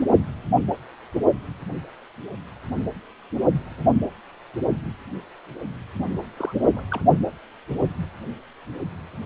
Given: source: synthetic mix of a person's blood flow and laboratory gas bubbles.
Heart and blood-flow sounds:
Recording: Doppler ultrasound of blood flow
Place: precordium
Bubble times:
6.37-6.86 s: bubbles
6.91-7.00 s: bubbles
From the record:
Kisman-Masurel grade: 121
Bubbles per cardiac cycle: 1 to 2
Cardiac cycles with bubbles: 10 to 50%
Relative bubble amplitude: barely perceptible (0.100 to 0.250)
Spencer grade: 2 (many but less than half of the cardiac periods contain bubble signals, singularly or in groups)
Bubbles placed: only in the low amplitude regions of the cardiac cycle

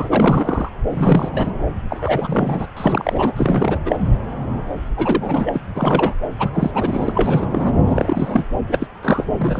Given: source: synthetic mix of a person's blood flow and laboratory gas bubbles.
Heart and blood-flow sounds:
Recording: Doppler ultrasound of blood flow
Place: subclavian vein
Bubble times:
0.00-0.06 s: bubbles
0.09-0.69 s: bubbles
0.90-1.52 s: bubbles
1.89-2.66 s: bubbles
2.76-3.32 s: bubbles
3.36-3.79 s: bubbles
3.85-3.98 s: bubbles
4.97-5.61 s: bubbles
5.76-6.15 s: bubbles
6.38-6.50 s: bubbles
6.54-7.47 s: bubbles
7.50-7.73 s: bubbles
7.86-8.45 s: bubbles
8.68-8.87 s: bubbles
9.03-9.24 s: bubbles
9.31-9.60 s: bubbles
From the record:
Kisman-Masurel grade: 343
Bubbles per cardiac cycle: rolling drumbeat, 9 or more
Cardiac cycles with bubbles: 100%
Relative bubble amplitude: loud (0.450 to 0.775)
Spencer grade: 3 (all of the cardiac periods contain showers or single bubble signals, but not dominating or overriding the cardiac motion signals)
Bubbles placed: anywhere in the cardiac cycle

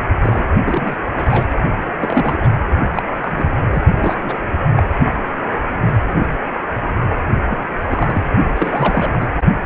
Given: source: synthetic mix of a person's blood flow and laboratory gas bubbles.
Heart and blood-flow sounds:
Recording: Doppler ultrasound of blood flow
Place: precordium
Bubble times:
0.21-0.45 s: bubbles
0.64-0.97 s: bubbles
1.15-1.52 s: bubbles
1.97-2.48 s: bubbles
2.94-3.02 s: bubbles
3.21-3.54 s: bubbles
3.69-3.83 s: bubbles
3.94-4.41 s: bubbles
4.76-4.83 s: bubbles
7.48-7.59 s: bubbles
7.76-8.22 s: bubbles
8.56-9.11 s: bubbles
9.20-9.28 s: bubbles
From the record:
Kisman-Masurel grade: 232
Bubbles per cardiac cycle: several, 3 to 8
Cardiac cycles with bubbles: 50 to 99%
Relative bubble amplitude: moderate (0.250 to 0.450)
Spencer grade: 3 (all of the cardiac periods contain showers or single bubble signals, but not dominating or overriding the cardiac motion signals)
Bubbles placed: only in the low amplitude regions of the cardiac cycle

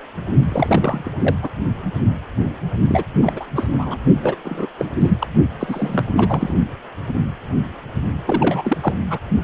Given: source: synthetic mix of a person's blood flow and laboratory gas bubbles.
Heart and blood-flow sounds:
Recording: Doppler ultrasound of blood flow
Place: precordium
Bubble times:
0.49-1.11 s: bubbles
1.19-1.36 s: bubbles
1.43-1.49 s: bubbles
2.88-3.03 s: bubbles
3.19-3.45 s: bubbles
3.55-3.70 s: bubbles
3.77-3.97 s: bubbles
4.20-4.35 s: bubbles
4.45-4.67 s: bubbles
4.79-4.92 s: bubbles
5.00-5.27 s: bubbles
5.59-6.06 s: bubbles
6.17-6.54 s: bubbles
8.25-8.78 s: bubbles
8.81-8.94 s: bubbles
9.10-9.19 s: bubbles
9.42-9.44 s: bubbles
From the record:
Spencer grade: 3 (all of the cardiac periods contain showers or single bubble signals, but not dominating or overriding the cardiac motion signals)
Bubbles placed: only in the low amplitude regions of the cardiac cycle

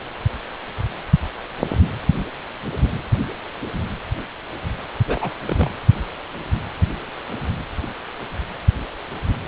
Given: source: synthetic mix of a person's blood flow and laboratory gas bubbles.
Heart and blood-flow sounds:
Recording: Doppler ultrasound of blood flow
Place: precordium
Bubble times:
5.07-5.33 s: bubbles
5.47-5.70 s: bubbles
From the record:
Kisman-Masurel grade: 211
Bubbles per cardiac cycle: several, 3 to 8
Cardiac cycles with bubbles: 1 to 10%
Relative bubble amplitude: barely perceptible (0.100 to 0.250)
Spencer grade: 1 (occasional bubble signal discernible with the cardiac motion signal, with majority of cardiac periods free of bubbles)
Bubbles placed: anywhere in the cardiac cycle

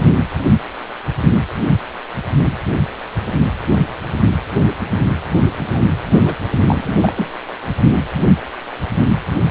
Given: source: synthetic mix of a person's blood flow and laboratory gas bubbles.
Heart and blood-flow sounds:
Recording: Doppler ultrasound of blood flow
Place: precordium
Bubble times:
5.67-5.83 s: bubbles
6.11-6.35 s: bubbles
6.67-7.30 s: bubbles
From the record:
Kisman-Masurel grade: 212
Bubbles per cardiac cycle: several, 3 to 8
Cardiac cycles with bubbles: 1 to 10%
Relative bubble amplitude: moderate (0.250 to 0.450)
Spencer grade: 1 (occasional bubble signal discernible with the cardiac motion signal, with majority of cardiac periods free of bubbles)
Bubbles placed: anywhere in the cardiac cycle

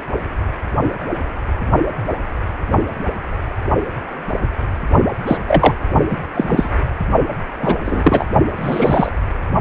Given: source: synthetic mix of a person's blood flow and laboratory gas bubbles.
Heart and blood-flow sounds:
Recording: Doppler ultrasound of blood flow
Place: precordium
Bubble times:
5.26-5.38 s: bubbles
5.48-5.74 s: bubbles
6.11-6.17 s: bubbles
6.34-6.71 s: bubbles
7.60-7.76 s: bubbles
7.86-8.26 s: bubbles
8.56-9.10 s: bubbles
From the record:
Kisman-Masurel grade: 233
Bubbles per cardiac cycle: several, 3 to 8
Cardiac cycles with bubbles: 50 to 99%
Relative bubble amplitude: loud (0.450 to 0.775)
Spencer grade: 3 (all of the cardiac periods contain showers or single bubble signals, but not dominating or overriding the cardiac motion signals)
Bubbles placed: only in the low amplitude regions of the cardiac cycle

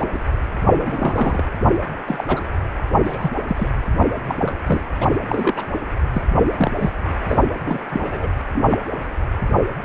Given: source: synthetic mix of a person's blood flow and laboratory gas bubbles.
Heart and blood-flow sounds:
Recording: Doppler ultrasound of blood flow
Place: precordium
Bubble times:
0.00-0.04 s: bubbles
0.12-0.19 s: bubbles
0.66-1.42 s: bubbles
2.06-2.24 s: bubbles
2.27-2.45 s: bubbles
3.03-3.31 s: bubbles
3.47-3.69 s: bubbles
4.27-4.53 s: bubbles
4.66-4.80 s: bubbles
5.00-5.07 s: bubbles
5.25-5.63 s: bubbles
6.12-6.22 s: bubbles
6.58-6.71 s: bubbles
6.79-6.91 s: bubbles
7.28-7.38 s: bubbles
7.66-7.79 s: bubbles
7.90-8.28 s: bubbles
8.52-8.65 s: bubbles
8.69-8.78 s: bubbles
From the record:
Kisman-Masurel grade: 243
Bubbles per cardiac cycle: several, 3 to 8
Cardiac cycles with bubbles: 100%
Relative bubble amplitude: loud (0.450 to 0.775)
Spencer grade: 3 (all of the cardiac periods contain showers or single bubble signals, but not dominating or overriding the cardiac motion signals)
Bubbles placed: anywhere in the cardiac cycle

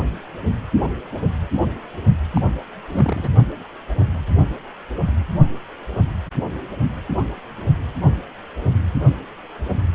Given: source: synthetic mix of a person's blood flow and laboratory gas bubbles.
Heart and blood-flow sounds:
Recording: Doppler ultrasound of blood flow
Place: precordium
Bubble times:
2.35-2.42 s: bubbles
2.92-3.29 s: bubbles
From the record:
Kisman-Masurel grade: 211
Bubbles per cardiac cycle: several, 3 to 8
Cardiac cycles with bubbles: 1 to 10%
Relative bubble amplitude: barely perceptible (0.100 to 0.250)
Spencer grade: 1 (occasional bubble signal discernible with the cardiac motion signal, with majority of cardiac periods free of bubbles)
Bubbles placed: only in the low amplitude regions of the cardiac cycle

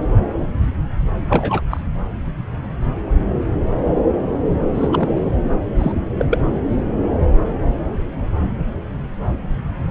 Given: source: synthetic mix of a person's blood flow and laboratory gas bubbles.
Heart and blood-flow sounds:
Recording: Doppler ultrasound of blood flow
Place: subclavian vein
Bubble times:
1.27-1.61 s: bubbles
1.71-1.80 s: bubbles
4.74-5.31 s: bubbles
5.78-5.92 s: bubbles
6.19-6.25 s: bubbles
6.30-6.40 s: bubbles
From the record:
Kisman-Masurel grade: 222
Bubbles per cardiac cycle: several, 3 to 8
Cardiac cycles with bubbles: 10 to 50%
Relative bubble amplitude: moderate (0.250 to 0.450)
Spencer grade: 2 (many but less than half of the cardiac periods contain bubble signals, singularly or in groups)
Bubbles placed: anywhere in the cardiac cycle

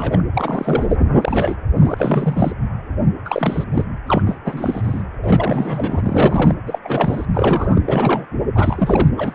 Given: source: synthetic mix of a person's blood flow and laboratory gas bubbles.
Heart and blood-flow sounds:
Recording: Doppler ultrasound of blood flow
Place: precordium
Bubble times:
0.00-0.23 s: bubbles
0.33-0.95 s: bubbles
1.21-1.54 s: bubbles
1.77-2.52 s: bubbles
3.25-3.64 s: bubbles
3.72-3.85 s: bubbles
4.06-4.22 s: bubbles
4.26-4.38 s: bubbles
4.44-5.02 s: bubbles
5.23-6.00 s: bubbles
6.03-6.54 s: bubbles
6.67-6.79 s: bubbles
6.84-7.25 s: bubbles
7.32-7.82 s: bubbles
7.86-8.26 s: bubbles
8.55-9.08 s: bubbles
9.15-9.35 s: bubbles
From the record:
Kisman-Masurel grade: 342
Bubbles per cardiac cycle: rolling drumbeat, 9 or more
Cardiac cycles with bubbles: 100%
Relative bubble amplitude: moderate (0.250 to 0.450)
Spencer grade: 3 (all of the cardiac periods contain showers or single bubble signals, but not dominating or overriding the cardiac motion signals)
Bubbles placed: anywhere in the cardiac cycle

